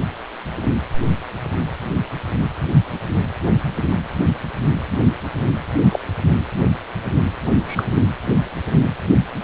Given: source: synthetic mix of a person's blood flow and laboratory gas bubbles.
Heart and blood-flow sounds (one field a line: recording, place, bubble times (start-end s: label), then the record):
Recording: Doppler ultrasound of blood flow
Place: precordium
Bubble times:
5.90-5.99 s: bubbles
7.66-7.85 s: bubbles
From the record:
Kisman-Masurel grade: 123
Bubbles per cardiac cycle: 1 to 2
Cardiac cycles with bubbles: 10 to 50%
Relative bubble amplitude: loud (0.450 to 0.775)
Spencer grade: 2 (many but less than half of the cardiac periods contain bubble signals, singularly or in groups)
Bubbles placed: anywhere in the cardiac cycle